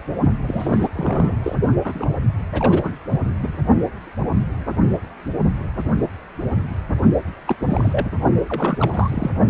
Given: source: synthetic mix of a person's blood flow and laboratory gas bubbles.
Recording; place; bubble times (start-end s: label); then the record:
Doppler ultrasound of blood flow; precordium
0.47-0.88 s: bubbles
0.95-1.38 s: bubbles
1.42-1.55 s: bubbles
1.84-2.17 s: bubbles
2.52-2.92 s: bubbles
3.42-3.57 s: bubbles
7.48-7.56 s: bubbles
7.61-8.10 s: bubbles
8.46-9.31 s: bubbles
From the record:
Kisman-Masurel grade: 332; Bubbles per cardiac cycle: rolling drumbeat, 9 or more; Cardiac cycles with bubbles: 50 to 99%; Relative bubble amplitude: moderate (0.250 to 0.450); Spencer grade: 3 (all of the cardiac periods contain showers or single bubble signals, but not dominating or overriding the cardiac motion signals); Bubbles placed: only in the low amplitude regions of the cardiac cycle